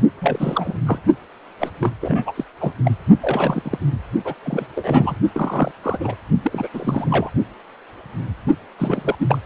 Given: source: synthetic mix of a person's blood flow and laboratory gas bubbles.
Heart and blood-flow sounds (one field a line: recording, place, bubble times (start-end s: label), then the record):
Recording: Doppler ultrasound of blood flow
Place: precordium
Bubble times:
0.21-0.78 s: bubbles
0.85-0.99 s: bubbles
1.60-1.71 s: bubbles
1.81-1.92 s: bubbles
2.01-2.32 s: bubbles
2.36-2.44 s: bubbles
2.60-2.72 s: bubbles
2.85-2.91 s: bubbles
3.20-3.62 s: bubbles
3.64-3.78 s: bubbles
4.24-4.34 s: bubbles
4.42-4.67 s: bubbles
4.75-5.18 s: bubbles
5.32-5.71 s: bubbles
5.83-6.14 s: bubbles
6.42-6.68 s: bubbles
6.73-7.29 s: bubbles
8.79-9.15 s: bubbles
9.19-9.38 s: bubbles
From the record:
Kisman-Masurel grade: 332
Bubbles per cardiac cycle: rolling drumbeat, 9 or more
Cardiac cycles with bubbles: 50 to 99%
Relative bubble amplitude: moderate (0.250 to 0.450)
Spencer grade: 3 (all of the cardiac periods contain showers or single bubble signals, but not dominating or overriding the cardiac motion signals)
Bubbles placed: only in the low amplitude regions of the cardiac cycle